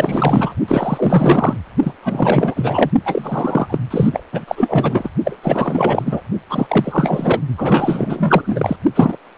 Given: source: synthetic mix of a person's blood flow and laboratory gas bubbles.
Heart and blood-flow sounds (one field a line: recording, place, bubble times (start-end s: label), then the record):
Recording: Doppler ultrasound of blood flow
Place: precordium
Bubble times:
0.00-0.55 s: bubbles
0.68-1.58 s: bubbles
1.83-1.92 s: bubbles
2.02-2.90 s: bubbles
3.05-3.78 s: bubbles
3.90-4.23 s: bubbles
4.32-4.45 s: bubbles
4.48-5.11 s: bubbles
5.25-5.39 s: bubbles
5.43-6.21 s: bubbles
6.50-7.40 s: bubbles
7.58-8.76 s: bubbles
8.95-9.16 s: bubbles
From the record:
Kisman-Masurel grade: 444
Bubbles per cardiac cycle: continuous sound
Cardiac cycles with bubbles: 100%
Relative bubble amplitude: maximal (0.775 to 0.999)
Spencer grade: 4 (maximum detectable bubble signal sounding continuously throughout systole and diastole of every cardiac period, and overriding the amplitude of the normal cardiac signals)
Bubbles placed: only in the low amplitude regions of the cardiac cycle